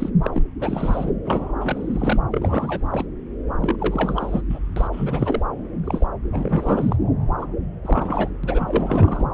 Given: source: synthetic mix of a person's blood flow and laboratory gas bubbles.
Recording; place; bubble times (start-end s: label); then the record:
Doppler ultrasound of blood flow; subclavian vein
0.00-0.10 s: bubbles
0.23-0.30 s: bubbles
0.33-0.43 s: bubbles
0.60-1.12 s: bubbles
1.25-1.54 s: bubbles
1.60-2.17 s: bubbles
2.31-2.88 s: bubbles
2.91-3.08 s: bubbles
3.60-3.75 s: bubbles
3.79-4.42 s: bubbles
4.49-4.59 s: bubbles
4.76-4.88 s: bubbles
4.92-5.42 s: bubbles
5.83-6.06 s: bubbles
6.31-6.96 s: bubbles
7.39-7.46 s: bubbles
7.83-8.30 s: bubbles
8.43-9.27 s: bubbles
From the record:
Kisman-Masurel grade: 342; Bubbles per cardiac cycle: rolling drumbeat, 9 or more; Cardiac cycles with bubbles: 100%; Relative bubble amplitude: moderate (0.250 to 0.450); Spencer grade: 3 (all of the cardiac periods contain showers or single bubble signals, but not dominating or overriding the cardiac motion signals); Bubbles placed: anywhere in the cardiac cycle